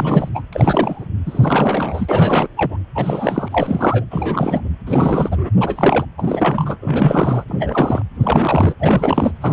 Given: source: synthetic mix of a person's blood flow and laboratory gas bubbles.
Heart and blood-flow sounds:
Doppler ultrasound of blood flow; precordium
0.00-0.29 s: bubbles
0.34-0.41 s: bubbles
0.53-1.06 s: bubbles
1.26-2.47 s: bubbles
2.56-2.76 s: bubbles
2.95-4.04 s: bubbles
4.11-4.61 s: bubbles
4.86-5.50 s: bubbles
5.60-6.06 s: bubbles
6.18-6.76 s: bubbles
6.81-7.44 s: bubbles
7.48-8.02 s: bubbles
8.20-8.74 s: bubbles
8.79-9.32 s: bubbles
9.40-9.53 s: bubbles
From the record:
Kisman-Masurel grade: 342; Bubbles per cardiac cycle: rolling drumbeat, 9 or more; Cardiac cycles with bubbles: 100%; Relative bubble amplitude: moderate (0.250 to 0.450); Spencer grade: 3 (all of the cardiac periods contain showers or single bubble signals, but not dominating or overriding the cardiac motion signals); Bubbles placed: anywhere in the cardiac cycle

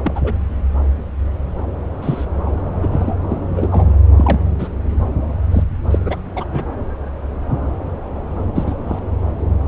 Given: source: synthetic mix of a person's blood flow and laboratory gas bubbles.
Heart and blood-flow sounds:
Doppler ultrasound of blood flow; subclavian vein
0.03-0.37 s: bubbles
2.01-2.25 s: bubbles
2.46-2.51 s: bubbles
2.80-3.16 s: bubbles
3.29-3.41 s: bubbles
3.56-3.68 s: bubbles
3.71-3.94 s: bubbles
4.16-4.39 s: bubbles
4.58-4.69 s: bubbles
5.51-5.63 s: bubbles
5.90-6.21 s: bubbles
6.35-6.45 s: bubbles
6.52-6.63 s: bubbles
8.55-8.75 s: bubbles
8.88-8.99 s: bubbles
From the record:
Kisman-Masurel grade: 232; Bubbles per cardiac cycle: several, 3 to 8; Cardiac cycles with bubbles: 50 to 99%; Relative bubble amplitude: moderate (0.250 to 0.450); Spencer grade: 3 (all of the cardiac periods contain showers or single bubble signals, but not dominating or overriding the cardiac motion signals); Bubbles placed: anywhere in the cardiac cycle

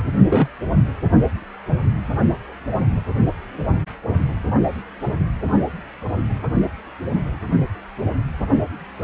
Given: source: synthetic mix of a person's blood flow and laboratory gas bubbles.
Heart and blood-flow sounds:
Doppler ultrasound of blood flow; precordium
0.29-0.48 s: bubbles
From the record:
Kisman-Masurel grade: 113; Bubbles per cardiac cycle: 1 to 2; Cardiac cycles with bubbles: 1 to 10%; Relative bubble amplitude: loud (0.450 to 0.775); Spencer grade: 1 (occasional bubble signal discernible with the cardiac motion signal, with majority of cardiac periods free of bubbles); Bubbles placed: only in the low amplitude regions of the cardiac cycle

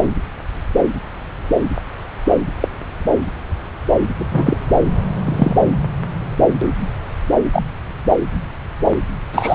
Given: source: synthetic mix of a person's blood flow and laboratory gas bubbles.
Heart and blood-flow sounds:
Doppler ultrasound of blood flow; subclavian vein
2.60-2.68 s: bubbles
4.16-4.57 s: bubbles
5.25-5.55 s: bubbles
7.53-7.63 s: bubbles
9.32-9.55 s: bubbles
From the record:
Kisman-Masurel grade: 123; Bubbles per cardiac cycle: 1 to 2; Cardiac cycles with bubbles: 10 to 50%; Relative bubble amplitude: loud (0.450 to 0.775); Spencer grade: 2 (many but less than half of the cardiac periods contain bubble signals, singularly or in groups); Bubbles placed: anywhere in the cardiac cycle

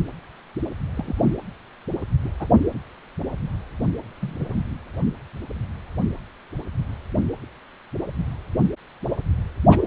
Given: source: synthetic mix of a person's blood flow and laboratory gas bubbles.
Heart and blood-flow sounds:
Doppler ultrasound of blood flow; precordium
0.94-1.22 s: bubbles
1.26-1.32 s: bubbles
2.24-2.31 s: bubbles
2.40-2.47 s: bubbles
4.21-4.55 s: bubbles
9.70-9.84 s: bubbles
From the record:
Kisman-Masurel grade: 121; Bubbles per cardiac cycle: 1 to 2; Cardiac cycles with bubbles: 10 to 50%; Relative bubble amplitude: barely perceptible (0.100 to 0.250); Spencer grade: 2 (many but less than half of the cardiac periods contain bubble signals, singularly or in groups); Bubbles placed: anywhere in the cardiac cycle

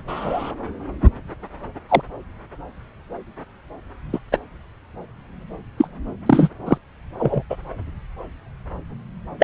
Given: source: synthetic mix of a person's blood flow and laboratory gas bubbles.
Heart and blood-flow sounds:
Doppler ultrasound of blood flow; subclavian vein
0.08-0.52 s: bubbles
1.89-2.02 s: bubbles
4.12-4.19 s: bubbles
4.32-4.38 s: bubbles
5.78-5.88 s: bubbles
6.26-6.49 s: bubbles
6.66-6.78 s: bubbles
7.18-7.42 s: bubbles
7.50-7.56 s: bubbles
9.39-9.44 s: bubbles
From the record:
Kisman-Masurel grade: 123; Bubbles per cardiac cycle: 1 to 2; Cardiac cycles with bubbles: 10 to 50%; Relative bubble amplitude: loud (0.450 to 0.775); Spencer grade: 2 (many but less than half of the cardiac periods contain bubble signals, singularly or in groups); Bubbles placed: anywhere in the cardiac cycle

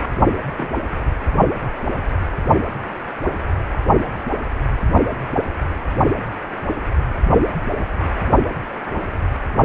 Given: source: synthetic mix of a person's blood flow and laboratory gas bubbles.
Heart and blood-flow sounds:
Doppler ultrasound of blood flow; precordium
0.56-0.68 s: bubbles
0.92-0.97 s: bubbles
From the record:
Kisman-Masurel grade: 111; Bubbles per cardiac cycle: 1 to 2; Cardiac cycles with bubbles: 1 to 10%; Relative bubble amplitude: barely perceptible (0.100 to 0.250); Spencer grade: 1 (occasional bubble signal discernible with the cardiac motion signal, with majority of cardiac periods free of bubbles); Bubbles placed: only in the low amplitude regions of the cardiac cycle

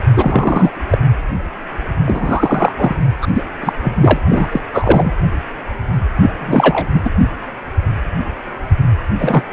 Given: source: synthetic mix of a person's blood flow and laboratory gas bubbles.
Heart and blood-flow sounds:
Doppler ultrasound of blood flow; precordium
0.17-0.71 s: bubbles
0.90-0.98 s: bubbles
2.06-2.73 s: bubbles
2.77-2.95 s: bubbles
3.21-3.27 s: bubbles
3.34-3.43 s: bubbles
3.62-3.73 s: bubbles
3.80-4.20 s: bubbles
4.26-4.61 s: bubbles
4.72-5.12 s: bubbles
6.20-6.88 s: bubbles
6.92-7.01 s: bubbles
7.04-7.10 s: bubbles
9.19-9.43 s: bubbles
From the record:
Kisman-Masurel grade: 333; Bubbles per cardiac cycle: rolling drumbeat, 9 or more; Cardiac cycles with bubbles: 50 to 99%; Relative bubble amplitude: loud (0.450 to 0.775); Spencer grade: 3 (all of the cardiac periods contain showers or single bubble signals, but not dominating or overriding the cardiac motion signals); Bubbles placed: anywhere in the cardiac cycle

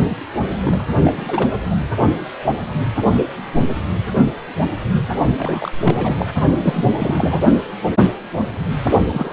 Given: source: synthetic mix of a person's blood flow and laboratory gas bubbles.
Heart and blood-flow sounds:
Doppler ultrasound of blood flow; precordium
0.00-0.02 s: bubbles
0.08-0.17 s: bubbles
0.63-0.83 s: bubbles
1.03-1.49 s: bubbles
1.71-1.78 s: bubbles
5.37-5.71 s: bubbles
5.83-6.16 s: bubbles
6.19-6.26 s: bubbles
6.63-7.41 s: bubbles
9.06-9.33 s: bubbles
From the record:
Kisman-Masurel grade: 332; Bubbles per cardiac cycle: rolling drumbeat, 9 or more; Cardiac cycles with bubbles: 50 to 99%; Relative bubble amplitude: moderate (0.250 to 0.450); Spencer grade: 3 (all of the cardiac periods contain showers or single bubble signals, but not dominating or overriding the cardiac motion signals); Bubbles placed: only in the low amplitude regions of the cardiac cycle

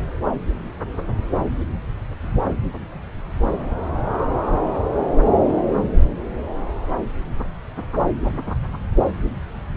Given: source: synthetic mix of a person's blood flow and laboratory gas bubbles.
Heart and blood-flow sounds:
Doppler ultrasound of blood flow; subclavian vein
no bubbles
From the record:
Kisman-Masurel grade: 000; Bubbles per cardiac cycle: 0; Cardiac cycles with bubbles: 0%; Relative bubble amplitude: no bubbles discernible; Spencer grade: 0 (complete lack of bubble signals)

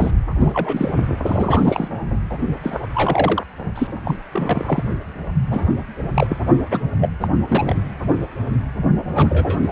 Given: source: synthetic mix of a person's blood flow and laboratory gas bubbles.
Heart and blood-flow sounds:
Doppler ultrasound of blood flow; precordium
0.00-0.16 s: bubbles
0.40-0.91 s: bubbles
1.26-1.88 s: bubbles
2.30-2.38 s: bubbles
2.63-2.78 s: bubbles
2.94-3.44 s: bubbles
3.74-3.87 s: bubbles
4.04-4.16 s: bubbles
4.32-4.89 s: bubbles
5.45-5.67 s: bubbles
6.14-6.37 s: bubbles
6.71-6.81 s: bubbles
7.01-7.09 s: bubbles
7.20-7.29 s: bubbles
7.49-7.76 s: bubbles
8.97-9.05 s: bubbles
9.15-9.69 s: bubbles
From the record:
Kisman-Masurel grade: 232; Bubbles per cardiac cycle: several, 3 to 8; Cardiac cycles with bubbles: 50 to 99%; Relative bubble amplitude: moderate (0.250 to 0.450); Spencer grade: 3 (all of the cardiac periods contain showers or single bubble signals, but not dominating or overriding the cardiac motion signals); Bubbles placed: only in the low amplitude regions of the cardiac cycle

